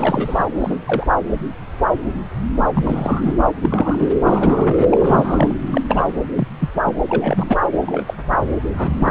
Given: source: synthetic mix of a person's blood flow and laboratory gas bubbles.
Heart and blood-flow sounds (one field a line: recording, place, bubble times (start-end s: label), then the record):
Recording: Doppler ultrasound of blood flow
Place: subclavian vein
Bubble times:
0.00-0.45 s: bubbles
0.59-0.79 s: bubbles
0.86-1.06 s: bubbles
2.74-3.34 s: bubbles
3.61-4.11 s: bubbles
4.25-4.88 s: bubbles
4.91-5.55 s: bubbles
5.67-5.82 s: bubbles
5.88-6.15 s: bubbles
6.36-6.48 s: bubbles
6.59-6.69 s: bubbles
6.86-6.92 s: bubbles
7.08-7.58 s: bubbles
7.72-8.03 s: bubbles
8.06-8.14 s: bubbles
8.77-9.11 s: bubbles
From the record:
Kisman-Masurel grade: 232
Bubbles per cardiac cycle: several, 3 to 8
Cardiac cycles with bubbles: 50 to 99%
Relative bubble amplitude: moderate (0.250 to 0.450)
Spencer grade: 3 (all of the cardiac periods contain showers or single bubble signals, but not dominating or overriding the cardiac motion signals)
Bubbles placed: anywhere in the cardiac cycle